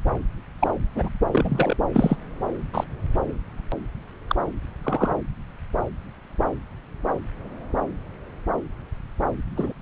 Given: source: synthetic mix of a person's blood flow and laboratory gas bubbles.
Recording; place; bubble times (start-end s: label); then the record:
Doppler ultrasound of blood flow; subclavian vein
0.59-0.71 s: bubbles
0.95-1.09 s: bubbles
1.32-1.76 s: bubbles
1.92-2.16 s: bubbles
2.73-2.84 s: bubbles
4.28-4.36 s: bubbles
4.83-5.13 s: bubbles
9.56-9.72 s: bubbles
From the record:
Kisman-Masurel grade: 122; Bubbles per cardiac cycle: 1 to 2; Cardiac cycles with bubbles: 10 to 50%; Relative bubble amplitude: moderate (0.250 to 0.450); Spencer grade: 2 (many but less than half of the cardiac periods contain bubble signals, singularly or in groups); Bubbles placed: anywhere in the cardiac cycle